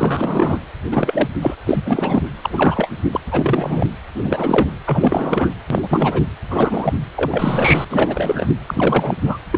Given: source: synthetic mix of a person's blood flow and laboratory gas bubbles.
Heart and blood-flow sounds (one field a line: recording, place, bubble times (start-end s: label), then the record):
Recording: Doppler ultrasound of blood flow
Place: precordium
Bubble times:
0.00-0.60 s: bubbles
0.91-1.29 s: bubbles
1.42-1.54 s: bubbles
1.66-2.23 s: bubbles
2.42-2.90 s: bubbles
3.11-3.20 s: bubbles
3.31-3.88 s: bubbles
4.15-4.67 s: bubbles
4.84-5.52 s: bubbles
5.70-6.23 s: bubbles
6.50-6.93 s: bubbles
7.16-7.85 s: bubbles
7.90-8.47 s: bubbles
8.67-9.15 s: bubbles
9.25-9.38 s: bubbles
9.51-9.58 s: bubbles
From the record:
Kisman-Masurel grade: 343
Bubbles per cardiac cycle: rolling drumbeat, 9 or more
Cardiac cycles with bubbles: 100%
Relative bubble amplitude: loud (0.450 to 0.775)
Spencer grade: 3 (all of the cardiac periods contain showers or single bubble signals, but not dominating or overriding the cardiac motion signals)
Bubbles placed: anywhere in the cardiac cycle